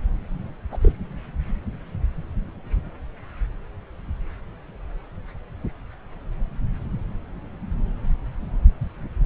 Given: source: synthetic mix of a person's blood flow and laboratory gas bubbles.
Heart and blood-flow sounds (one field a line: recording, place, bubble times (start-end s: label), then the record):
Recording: Doppler ultrasound of blood flow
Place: subclavian vein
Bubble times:
0.71-0.77 s: bubbles
0.81-0.93 s: bubbles
From the record:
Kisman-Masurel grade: 111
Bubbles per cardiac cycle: 1 to 2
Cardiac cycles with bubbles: 1 to 10%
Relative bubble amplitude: barely perceptible (0.100 to 0.250)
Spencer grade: 1 (occasional bubble signal discernible with the cardiac motion signal, with majority of cardiac periods free of bubbles)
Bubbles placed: anywhere in the cardiac cycle